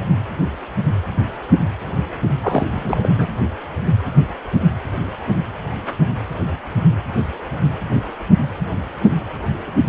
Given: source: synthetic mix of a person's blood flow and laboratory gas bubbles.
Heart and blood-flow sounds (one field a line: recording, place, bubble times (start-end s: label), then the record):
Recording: Doppler ultrasound of blood flow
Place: precordium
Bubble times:
2.42-2.67 s: bubbles
2.71-3.09 s: bubbles
3.17-3.27 s: bubbles
From the record:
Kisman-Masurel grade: 212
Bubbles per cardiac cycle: several, 3 to 8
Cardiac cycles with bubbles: 1 to 10%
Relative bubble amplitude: moderate (0.250 to 0.450)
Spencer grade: 1 (occasional bubble signal discernible with the cardiac motion signal, with majority of cardiac periods free of bubbles)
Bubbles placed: anywhere in the cardiac cycle